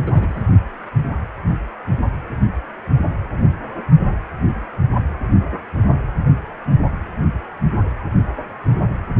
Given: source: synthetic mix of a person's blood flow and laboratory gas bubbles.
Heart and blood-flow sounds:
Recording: Doppler ultrasound of blood flow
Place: precordium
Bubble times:
0.06-0.42 s: bubbles
From the record:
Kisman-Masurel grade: 211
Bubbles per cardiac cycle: several, 3 to 8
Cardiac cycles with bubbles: 1 to 10%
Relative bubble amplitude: barely perceptible (0.100 to 0.250)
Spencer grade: 1 (occasional bubble signal discernible with the cardiac motion signal, with majority of cardiac periods free of bubbles)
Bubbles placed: anywhere in the cardiac cycle

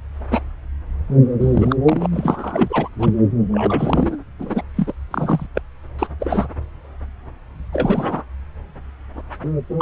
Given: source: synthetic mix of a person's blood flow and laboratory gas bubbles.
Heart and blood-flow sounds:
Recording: Doppler ultrasound of blood flow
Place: subclavian vein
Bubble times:
0.30-0.39 s: bubbles
1.40-1.76 s: bubbles
1.86-2.06 s: bubbles
2.11-2.88 s: bubbles
2.98-3.14 s: bubbles
3.51-4.16 s: bubbles
4.39-4.62 s: bubbles
4.77-4.93 s: bubbles
5.11-5.47 s: bubbles
5.55-5.62 s: bubbles
5.99-6.07 s: bubbles
6.20-6.48 s: bubbles
7.73-8.24 s: bubbles
9.79-9.81 s: bubbles
From the record:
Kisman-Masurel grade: 232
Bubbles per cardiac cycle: several, 3 to 8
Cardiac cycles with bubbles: 50 to 99%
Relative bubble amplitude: moderate (0.250 to 0.450)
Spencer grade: 3 (all of the cardiac periods contain showers or single bubble signals, but not dominating or overriding the cardiac motion signals)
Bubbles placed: anywhere in the cardiac cycle

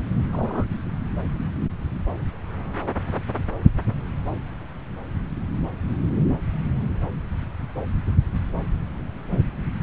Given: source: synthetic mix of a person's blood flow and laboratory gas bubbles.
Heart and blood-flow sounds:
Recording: Doppler ultrasound of blood flow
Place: subclavian vein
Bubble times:
0.32-0.65 s: bubbles
From the record:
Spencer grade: 1 (occasional bubble signal discernible with the cardiac motion signal, with majority of cardiac periods free of bubbles)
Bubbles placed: anywhere in the cardiac cycle

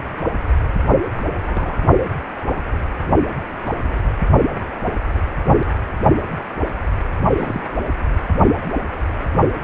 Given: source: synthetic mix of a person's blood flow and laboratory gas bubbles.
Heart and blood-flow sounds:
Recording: Doppler ultrasound of blood flow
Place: precordium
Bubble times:
1.12-1.76 s: bubbles
3.54-3.71 s: bubbles
7.35-7.63 s: bubbles
From the record:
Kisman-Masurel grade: 121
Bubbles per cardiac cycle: 1 to 2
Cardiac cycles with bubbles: 10 to 50%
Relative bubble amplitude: barely perceptible (0.100 to 0.250)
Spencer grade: 2 (many but less than half of the cardiac periods contain bubble signals, singularly or in groups)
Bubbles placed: anywhere in the cardiac cycle

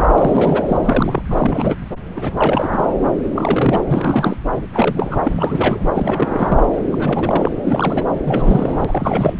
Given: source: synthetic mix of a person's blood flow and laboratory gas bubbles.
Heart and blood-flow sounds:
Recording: Doppler ultrasound of blood flow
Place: subclavian vein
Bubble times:
0.00-0.08 s: bubbles
0.18-0.62 s: bubbles
0.66-1.23 s: bubbles
1.28-1.79 s: bubbles
2.17-2.31 s: bubbles
2.37-2.94 s: bubbles
3.35-3.84 s: bubbles
3.90-4.36 s: bubbles
4.52-4.62 s: bubbles
4.73-5.21 s: bubbles
5.23-5.84 s: bubbles
5.94-6.58 s: bubbles
6.91-7.49 s: bubbles
7.64-8.04 s: bubbles
8.24-9.37 s: bubbles
From the record:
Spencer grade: 3 (all of the cardiac periods contain showers or single bubble signals, but not dominating or overriding the cardiac motion signals)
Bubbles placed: anywhere in the cardiac cycle

